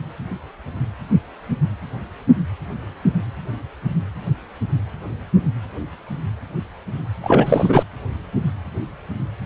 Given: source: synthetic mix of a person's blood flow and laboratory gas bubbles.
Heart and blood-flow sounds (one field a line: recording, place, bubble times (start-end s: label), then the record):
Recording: Doppler ultrasound of blood flow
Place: precordium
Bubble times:
7.23-7.83 s: bubbles
From the record:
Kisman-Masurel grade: 213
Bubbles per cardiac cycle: several, 3 to 8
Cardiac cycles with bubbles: 1 to 10%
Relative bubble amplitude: loud (0.450 to 0.775)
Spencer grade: 1 (occasional bubble signal discernible with the cardiac motion signal, with majority of cardiac periods free of bubbles)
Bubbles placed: anywhere in the cardiac cycle